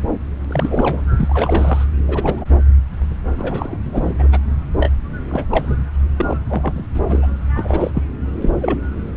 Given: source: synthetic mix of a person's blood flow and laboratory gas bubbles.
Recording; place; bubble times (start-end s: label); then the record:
Doppler ultrasound of blood flow; subclavian vein
0.44-1.04 s: bubbles
1.17-1.85 s: bubbles
2.07-2.44 s: bubbles
3.32-3.77 s: bubbles
3.84-4.14 s: bubbles
4.18-4.28 s: bubbles
4.32-4.38 s: bubbles
4.79-4.89 s: bubbles
5.29-5.44 s: bubbles
5.50-5.79 s: bubbles
6.16-6.37 s: bubbles
6.49-6.84 s: bubbles
6.94-7.01 s: bubbles
7.08-7.26 s: bubbles
7.55-7.91 s: bubbles
7.94-8.03 s: bubbles
8.42-8.50 s: bubbles
8.61-8.81 s: bubbles
From the record:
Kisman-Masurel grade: 232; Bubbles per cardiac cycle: several, 3 to 8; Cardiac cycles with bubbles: 50 to 99%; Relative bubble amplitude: moderate (0.250 to 0.450); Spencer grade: 3 (all of the cardiac periods contain showers or single bubble signals, but not dominating or overriding the cardiac motion signals); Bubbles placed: anywhere in the cardiac cycle